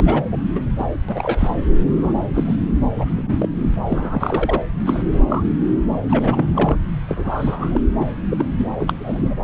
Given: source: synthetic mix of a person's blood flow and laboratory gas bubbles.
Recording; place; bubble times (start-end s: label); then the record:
Doppler ultrasound of blood flow; subclavian vein
0.00-0.23 s: bubbles
0.32-0.37 s: bubbles
0.55-0.60 s: bubbles
0.78-0.85 s: bubbles
1.08-1.51 s: bubbles
1.96-2.12 s: bubbles
2.33-2.56 s: bubbles
2.98-3.05 s: bubbles
3.16-3.35 s: bubbles
3.38-3.49 s: bubbles
3.88-4.62 s: bubbles
4.86-5.03 s: bubbles
5.11-5.22 s: bubbles
5.28-5.43 s: bubbles
6.08-6.51 s: bubbles
6.55-6.77 s: bubbles
7.08-7.81 s: bubbles
7.99-8.05 s: bubbles
8.30-8.46 s: bubbles
8.57-8.68 s: bubbles
8.80-8.93 s: bubbles
8.99-9.34 s: bubbles
From the record:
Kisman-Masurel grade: 242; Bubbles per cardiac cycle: several, 3 to 8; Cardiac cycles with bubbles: 100%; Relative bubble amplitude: moderate (0.250 to 0.450); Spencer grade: 3 (all of the cardiac periods contain showers or single bubble signals, but not dominating or overriding the cardiac motion signals); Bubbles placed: anywhere in the cardiac cycle